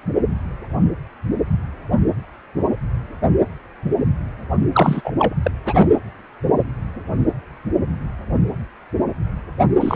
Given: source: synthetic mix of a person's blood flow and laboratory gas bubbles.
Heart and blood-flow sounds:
Doppler ultrasound of blood flow; precordium
4.73-5.02 s: bubbles
5.04-5.12 s: bubbles
5.19-5.35 s: bubbles
5.42-5.51 s: bubbles
5.66-5.88 s: bubbles
9.80-9.96 s: bubbles
From the record:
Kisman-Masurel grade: 223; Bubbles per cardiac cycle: several, 3 to 8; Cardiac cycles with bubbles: 10 to 50%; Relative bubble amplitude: loud (0.450 to 0.775); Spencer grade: 2 (many but less than half of the cardiac periods contain bubble signals, singularly or in groups); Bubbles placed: anywhere in the cardiac cycle

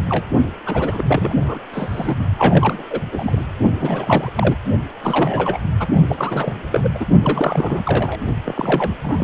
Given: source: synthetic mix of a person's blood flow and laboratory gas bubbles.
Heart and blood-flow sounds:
Doppler ultrasound of blood flow; precordium
0.00-0.04 s: bubbles
0.09-0.26 s: bubbles
0.66-1.59 s: bubbles
1.72-2.16 s: bubbles
2.38-2.83 s: bubbles
2.90-3.00 s: bubbles
3.11-3.42 s: bubbles
3.81-4.31 s: bubbles
4.35-4.56 s: bubbles
5.03-5.58 s: bubbles
5.79-5.88 s: bubbles
6.08-6.53 s: bubbles
6.72-6.91 s: bubbles
6.95-7.06 s: bubbles
7.23-7.81 s: bubbles
7.85-8.20 s: bubbles
8.45-8.94 s: bubbles
9.02-9.23 s: bubbles
From the record:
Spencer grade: 3 (all of the cardiac periods contain showers or single bubble signals, but not dominating or overriding the cardiac motion signals); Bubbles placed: only in the low amplitude regions of the cardiac cycle

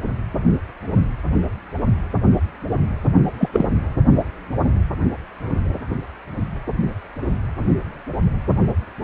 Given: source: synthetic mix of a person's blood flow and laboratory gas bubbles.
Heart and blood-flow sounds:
Doppler ultrasound of blood flow; precordium
3.40-3.49 s: bubbles
3.53-3.66 s: bubbles
From the record:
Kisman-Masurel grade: 213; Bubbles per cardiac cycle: several, 3 to 8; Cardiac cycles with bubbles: 1 to 10%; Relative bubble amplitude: loud (0.450 to 0.775); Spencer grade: 1 (occasional bubble signal discernible with the cardiac motion signal, with majority of cardiac periods free of bubbles); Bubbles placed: anywhere in the cardiac cycle

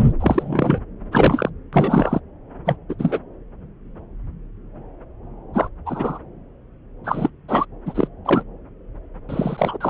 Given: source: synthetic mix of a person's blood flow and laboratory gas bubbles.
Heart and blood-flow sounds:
Doppler ultrasound of blood flow; subclavian vein
0.00-0.13 s: bubbles
0.17-0.81 s: bubbles
1.11-1.49 s: bubbles
1.72-2.21 s: bubbles
2.66-2.77 s: bubbles
2.89-2.96 s: bubbles
2.99-3.20 s: bubbles
5.54-5.69 s: bubbles
5.86-6.19 s: bubbles
7.04-7.30 s: bubbles
7.48-7.66 s: bubbles
7.86-8.07 s: bubbles
8.25-8.43 s: bubbles
9.29-9.78 s: bubbles
9.80-9.90 s: bubbles
From the record:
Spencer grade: 3 (all of the cardiac periods contain showers or single bubble signals, but not dominating or overriding the cardiac motion signals); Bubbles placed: anywhere in the cardiac cycle

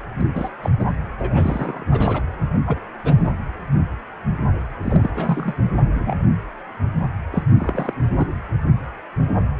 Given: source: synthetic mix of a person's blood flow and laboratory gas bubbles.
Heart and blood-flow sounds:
Doppler ultrasound of blood flow; precordium
0.21-0.27 s: bubbles
0.34-0.49 s: bubbles
0.62-0.70 s: bubbles
0.79-0.85 s: bubbles
1.19-1.84 s: bubbles
1.91-2.21 s: bubbles
2.67-2.79 s: bubbles
3.04-3.34 s: bubbles
4.81-5.09 s: bubbles
5.15-5.55 s: bubbles
5.80-6.16 s: bubbles
7.31-7.43 s: bubbles
7.56-7.94 s: bubbles
8.13-8.27 s: bubbles
From the record:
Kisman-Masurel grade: 232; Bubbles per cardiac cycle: several, 3 to 8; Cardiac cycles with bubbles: 50 to 99%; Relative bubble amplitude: moderate (0.250 to 0.450); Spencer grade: 3 (all of the cardiac periods contain showers or single bubble signals, but not dominating or overriding the cardiac motion signals); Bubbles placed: anywhere in the cardiac cycle

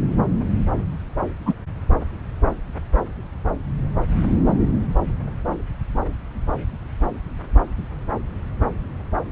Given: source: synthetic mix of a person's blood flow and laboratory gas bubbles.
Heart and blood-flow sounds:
Doppler ultrasound of blood flow; subclavian vein
1.46-1.54 s: bubbles
From the record:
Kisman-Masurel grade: 113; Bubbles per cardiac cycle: 1 to 2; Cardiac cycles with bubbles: 1 to 10%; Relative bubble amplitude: loud (0.450 to 0.775); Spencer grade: 1 (occasional bubble signal discernible with the cardiac motion signal, with majority of cardiac periods free of bubbles); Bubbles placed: anywhere in the cardiac cycle

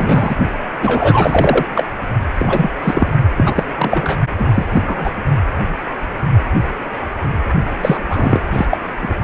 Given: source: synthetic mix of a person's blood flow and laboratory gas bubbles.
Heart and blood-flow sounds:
Doppler ultrasound of blood flow; precordium
0.00-0.35 s: bubbles
0.79-1.66 s: bubbles
1.75-1.85 s: bubbles
2.39-2.70 s: bubbles
2.83-3.11 s: bubbles
3.37-3.63 s: bubbles
3.75-4.20 s: bubbles
4.36-4.49 s: bubbles
4.54-4.66 s: bubbles
4.72-5.11 s: bubbles
7.82-8.00 s: bubbles
8.08-8.41 s: bubbles
8.52-8.66 s: bubbles
8.69-8.77 s: bubbles
9.01-9.14 s: bubbles
From the record:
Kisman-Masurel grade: 233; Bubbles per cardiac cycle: several, 3 to 8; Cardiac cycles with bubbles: 50 to 99%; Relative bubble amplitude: loud (0.450 to 0.775); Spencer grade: 3 (all of the cardiac periods contain showers or single bubble signals, but not dominating or overriding the cardiac motion signals); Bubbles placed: only in the low amplitude regions of the cardiac cycle

